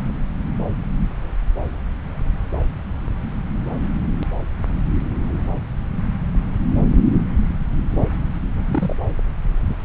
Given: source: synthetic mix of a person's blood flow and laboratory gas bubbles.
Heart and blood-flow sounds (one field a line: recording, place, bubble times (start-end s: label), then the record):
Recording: Doppler ultrasound of blood flow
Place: subclavian vein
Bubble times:
8.65-8.96 s: bubbles
9.69-9.75 s: bubbles
From the record:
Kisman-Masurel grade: 122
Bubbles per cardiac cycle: 1 to 2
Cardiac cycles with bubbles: 10 to 50%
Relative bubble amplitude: moderate (0.250 to 0.450)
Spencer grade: 2 (many but less than half of the cardiac periods contain bubble signals, singularly or in groups)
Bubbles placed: anywhere in the cardiac cycle